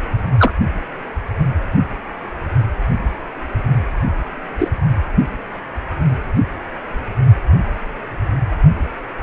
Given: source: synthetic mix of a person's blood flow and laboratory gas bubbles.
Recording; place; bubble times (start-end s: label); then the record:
Doppler ultrasound of blood flow; precordium
0.38-0.52 s: bubbles
4.58-4.68 s: bubbles
From the record:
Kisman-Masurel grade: 123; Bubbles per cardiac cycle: 1 to 2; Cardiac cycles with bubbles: 10 to 50%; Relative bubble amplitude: loud (0.450 to 0.775); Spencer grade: 2 (many but less than half of the cardiac periods contain bubble signals, singularly or in groups); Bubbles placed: anywhere in the cardiac cycle